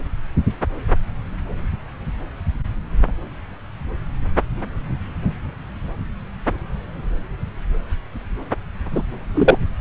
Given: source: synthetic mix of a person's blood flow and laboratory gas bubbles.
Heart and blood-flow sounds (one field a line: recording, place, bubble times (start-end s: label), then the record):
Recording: Doppler ultrasound of blood flow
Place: subclavian vein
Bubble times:
8.92-9.03 s: bubbles
9.34-9.59 s: bubbles
From the record:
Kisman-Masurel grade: 223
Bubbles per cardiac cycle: several, 3 to 8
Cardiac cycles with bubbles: 10 to 50%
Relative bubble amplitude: loud (0.450 to 0.775)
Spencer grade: 2 (many but less than half of the cardiac periods contain bubble signals, singularly or in groups)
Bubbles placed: anywhere in the cardiac cycle